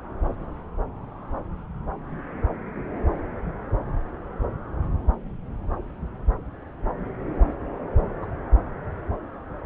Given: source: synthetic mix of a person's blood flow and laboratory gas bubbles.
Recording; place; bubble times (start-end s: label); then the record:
Doppler ultrasound of blood flow; subclavian vein
8.21-8.26 s: bubbles
From the record:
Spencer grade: 2 (many but less than half of the cardiac periods contain bubble signals, singularly or in groups); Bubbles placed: anywhere in the cardiac cycle